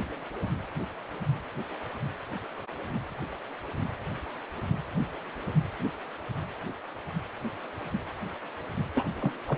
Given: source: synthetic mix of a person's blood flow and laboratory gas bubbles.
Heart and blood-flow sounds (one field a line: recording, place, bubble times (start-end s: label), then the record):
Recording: Doppler ultrasound of blood flow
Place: precordium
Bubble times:
8.95-9.06 s: bubbles
9.21-9.31 s: bubbles
9.49-9.58 s: bubbles
From the record:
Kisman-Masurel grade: 211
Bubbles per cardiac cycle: several, 3 to 8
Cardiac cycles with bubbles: 1 to 10%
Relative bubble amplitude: barely perceptible (0.100 to 0.250)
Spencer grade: 1 (occasional bubble signal discernible with the cardiac motion signal, with majority of cardiac periods free of bubbles)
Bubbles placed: anywhere in the cardiac cycle